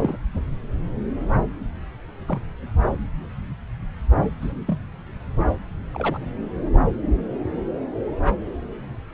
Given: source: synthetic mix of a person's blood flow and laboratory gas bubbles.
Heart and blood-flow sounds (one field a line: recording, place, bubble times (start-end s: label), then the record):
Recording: Doppler ultrasound of blood flow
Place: subclavian vein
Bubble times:
0.00-0.17 s: bubbles
2.28-2.40 s: bubbles
4.41-4.53 s: bubbles
4.67-4.78 s: bubbles
5.93-6.19 s: bubbles
From the record:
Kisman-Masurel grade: 122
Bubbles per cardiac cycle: 1 to 2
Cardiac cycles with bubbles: 10 to 50%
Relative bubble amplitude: moderate (0.250 to 0.450)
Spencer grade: 2 (many but less than half of the cardiac periods contain bubble signals, singularly or in groups)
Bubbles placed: anywhere in the cardiac cycle